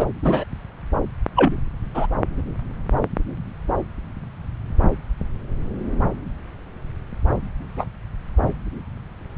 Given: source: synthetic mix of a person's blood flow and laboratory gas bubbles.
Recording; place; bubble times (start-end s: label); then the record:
Doppler ultrasound of blood flow; subclavian vein
0.00-0.05 s: bubbles
0.22-0.44 s: bubbles
1.36-1.57 s: bubbles
1.94-2.06 s: bubbles
7.76-7.87 s: bubbles
From the record:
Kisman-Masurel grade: 123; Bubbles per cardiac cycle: 1 to 2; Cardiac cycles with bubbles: 10 to 50%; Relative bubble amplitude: loud (0.450 to 0.775); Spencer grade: 2 (many but less than half of the cardiac periods contain bubble signals, singularly or in groups); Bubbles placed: anywhere in the cardiac cycle